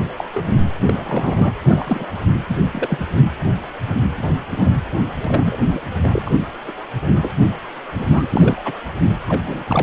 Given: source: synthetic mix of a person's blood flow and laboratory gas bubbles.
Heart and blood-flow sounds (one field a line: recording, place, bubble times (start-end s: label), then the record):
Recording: Doppler ultrasound of blood flow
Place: precordium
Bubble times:
0.17-0.25 s: bubbles
0.34-0.42 s: bubbles
0.48-0.58 s: bubbles
0.85-1.53 s: bubbles
1.65-2.08 s: bubbles
2.48-2.56 s: bubbles
2.73-3.05 s: bubbles
4.10-4.40 s: bubbles
4.50-4.70 s: bubbles
5.24-5.58 s: bubbles
5.67-5.81 s: bubbles
6.03-6.30 s: bubbles
6.48-6.52 s: bubbles
6.67-6.71 s: bubbles
7.15-7.31 s: bubbles
7.42-7.45 s: bubbles
7.94-8.27 s: bubbles
8.29-8.74 s: bubbles
9.28-9.40 s: bubbles
9.44-9.63 s: bubbles
9.67-9.83 s: bubbles
From the record:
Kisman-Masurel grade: 242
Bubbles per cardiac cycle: several, 3 to 8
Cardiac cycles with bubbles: 100%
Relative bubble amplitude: moderate (0.250 to 0.450)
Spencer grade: 3 (all of the cardiac periods contain showers or single bubble signals, but not dominating or overriding the cardiac motion signals)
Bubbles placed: anywhere in the cardiac cycle